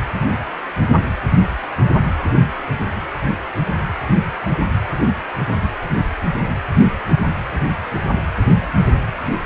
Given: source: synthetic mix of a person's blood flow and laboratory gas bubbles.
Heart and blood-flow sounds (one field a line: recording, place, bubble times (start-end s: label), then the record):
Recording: Doppler ultrasound of blood flow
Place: precordium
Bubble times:
no bubbles
From the record:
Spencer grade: 0 (complete lack of bubble signals)